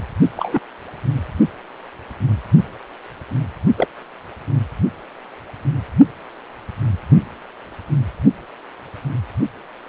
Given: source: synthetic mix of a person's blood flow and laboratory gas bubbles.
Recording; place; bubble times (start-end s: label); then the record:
Doppler ultrasound of blood flow; precordium
0.36-0.59 s: bubbles
3.77-3.88 s: bubbles
From the record:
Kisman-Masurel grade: 122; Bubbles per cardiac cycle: 1 to 2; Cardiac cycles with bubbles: 10 to 50%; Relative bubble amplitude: moderate (0.250 to 0.450); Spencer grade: 2 (many but less than half of the cardiac periods contain bubble signals, singularly or in groups); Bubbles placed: only in the low amplitude regions of the cardiac cycle